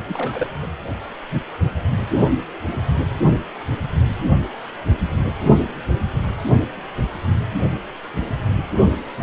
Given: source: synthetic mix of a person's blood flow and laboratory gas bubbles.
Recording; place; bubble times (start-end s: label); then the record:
Doppler ultrasound of blood flow; precordium
0.07-0.47 s: bubbles
0.62-0.67 s: bubbles
From the record:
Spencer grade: 1 (occasional bubble signal discernible with the cardiac motion signal, with majority of cardiac periods free of bubbles); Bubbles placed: only in the low amplitude regions of the cardiac cycle